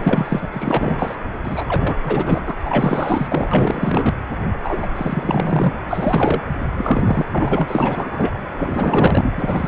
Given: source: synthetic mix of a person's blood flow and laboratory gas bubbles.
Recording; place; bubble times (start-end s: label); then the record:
Doppler ultrasound of blood flow; precordium
0.04-0.48 s: bubbles
0.53-1.16 s: bubbles
1.44-1.65 s: bubbles
1.68-1.96 s: bubbles
2.04-2.54 s: bubbles
2.65-3.48 s: bubbles
3.51-4.14 s: bubbles
4.63-4.87 s: bubbles
4.96-5.78 s: bubbles
5.89-6.42 s: bubbles
6.78-7.25 s: bubbles
7.32-8.36 s: bubbles
8.57-9.31 s: bubbles
9.36-9.68 s: bubbles
From the record:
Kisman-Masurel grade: 444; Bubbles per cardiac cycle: continuous sound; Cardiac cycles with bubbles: 100%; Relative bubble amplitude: maximal (0.775 to 0.999); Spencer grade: 4 (maximum detectable bubble signal sounding continuously throughout systole and diastole of every cardiac period, and overriding the amplitude of the normal cardiac signals); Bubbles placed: anywhere in the cardiac cycle